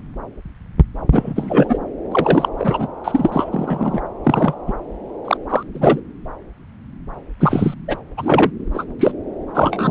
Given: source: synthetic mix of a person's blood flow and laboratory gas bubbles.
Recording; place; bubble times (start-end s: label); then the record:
Doppler ultrasound of blood flow; subclavian vein
1.11-1.78 s: bubbles
2.11-2.49 s: bubbles
2.58-2.88 s: bubbles
3.04-4.01 s: bubbles
4.24-4.54 s: bubbles
4.67-4.72 s: bubbles
5.25-5.37 s: bubbles
5.49-5.63 s: bubbles
5.73-6.01 s: bubbles
7.39-7.74 s: bubbles
7.88-7.97 s: bubbles
8.17-8.51 s: bubbles
8.74-8.85 s: bubbles
8.99-9.12 s: bubbles
9.54-9.90 s: bubbles
From the record:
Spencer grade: 3 (all of the cardiac periods contain showers or single bubble signals, but not dominating or overriding the cardiac motion signals); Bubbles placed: anywhere in the cardiac cycle